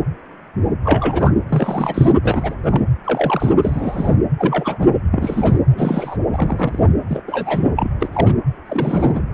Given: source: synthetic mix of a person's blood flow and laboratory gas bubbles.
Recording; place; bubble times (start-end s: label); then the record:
Doppler ultrasound of blood flow; precordium
0.83-1.34 s: bubbles
1.48-2.12 s: bubbles
2.24-2.55 s: bubbles
2.63-2.83 s: bubbles
3.04-3.55 s: bubbles
3.62-4.16 s: bubbles
4.38-4.90 s: bubbles
5.12-5.58 s: bubbles
5.70-6.17 s: bubbles
6.33-6.92 s: bubbles
7.08-7.23 s: bubbles
7.27-7.69 s: bubbles
7.75-7.91 s: bubbles
8.00-8.08 s: bubbles
8.12-8.33 s: bubbles
8.65-9.22 s: bubbles
From the record:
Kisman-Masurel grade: 232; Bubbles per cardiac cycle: several, 3 to 8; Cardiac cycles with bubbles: 50 to 99%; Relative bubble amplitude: moderate (0.250 to 0.450); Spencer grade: 3 (all of the cardiac periods contain showers or single bubble signals, but not dominating or overriding the cardiac motion signals); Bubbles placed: anywhere in the cardiac cycle